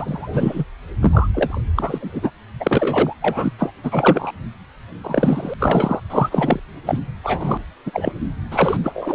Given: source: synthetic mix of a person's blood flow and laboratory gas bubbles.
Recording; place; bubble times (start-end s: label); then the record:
Doppler ultrasound of blood flow; precordium
0.00-0.64 s: bubbles
1.00-1.28 s: bubbles
1.34-1.60 s: bubbles
1.75-2.31 s: bubbles
2.60-3.15 s: bubbles
3.21-3.52 s: bubbles
3.58-3.73 s: bubbles
3.83-4.32 s: bubbles
5.04-5.54 s: bubbles
5.59-6.00 s: bubbles
6.10-6.60 s: bubbles
6.87-6.99 s: bubbles
7.24-7.58 s: bubbles
7.86-8.12 s: bubbles
8.51-8.77 s: bubbles
8.83-9.15 s: bubbles
From the record:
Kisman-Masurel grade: 233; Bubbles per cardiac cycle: several, 3 to 8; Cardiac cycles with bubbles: 50 to 99%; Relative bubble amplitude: loud (0.450 to 0.775); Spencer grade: 3 (all of the cardiac periods contain showers or single bubble signals, but not dominating or overriding the cardiac motion signals); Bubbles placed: anywhere in the cardiac cycle